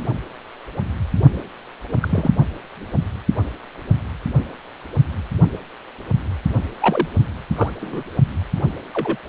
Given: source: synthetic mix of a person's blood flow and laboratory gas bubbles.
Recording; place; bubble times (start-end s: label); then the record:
Doppler ultrasound of blood flow; precordium
2.00-2.31 s: bubbles
6.80-7.08 s: bubbles
7.56-7.70 s: bubbles
7.80-8.03 s: bubbles
8.93-9.17 s: bubbles
From the record:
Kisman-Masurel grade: 122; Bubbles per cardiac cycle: 1 to 2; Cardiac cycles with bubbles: 10 to 50%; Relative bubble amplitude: moderate (0.250 to 0.450); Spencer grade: 2 (many but less than half of the cardiac periods contain bubble signals, singularly or in groups); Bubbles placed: only in the low amplitude regions of the cardiac cycle